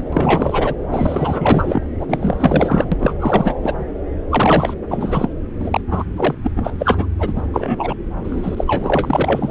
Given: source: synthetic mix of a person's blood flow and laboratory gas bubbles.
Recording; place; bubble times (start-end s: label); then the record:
Doppler ultrasound of blood flow; subclavian vein
0.12-0.75 s: bubbles
0.88-1.87 s: bubbles
2.00-2.85 s: bubbles
2.92-3.14 s: bubbles
3.20-3.54 s: bubbles
3.62-3.74 s: bubbles
4.29-4.74 s: bubbles
4.88-5.30 s: bubbles
5.59-5.81 s: bubbles
5.91-6.04 s: bubbles
6.16-6.34 s: bubbles
6.43-6.51 s: bubbles
6.56-6.71 s: bubbles
6.79-7.07 s: bubbles
7.19-7.33 s: bubbles
7.36-7.42 s: bubbles
7.54-7.95 s: bubbles
8.23-9.51 s: bubbles
From the record:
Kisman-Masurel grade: 444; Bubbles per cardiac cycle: continuous sound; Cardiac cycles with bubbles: 100%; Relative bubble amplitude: maximal (0.775 to 0.999); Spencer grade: 4 (maximum detectable bubble signal sounding continuously throughout systole and diastole of every cardiac period, and overriding the amplitude of the normal cardiac signals); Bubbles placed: anywhere in the cardiac cycle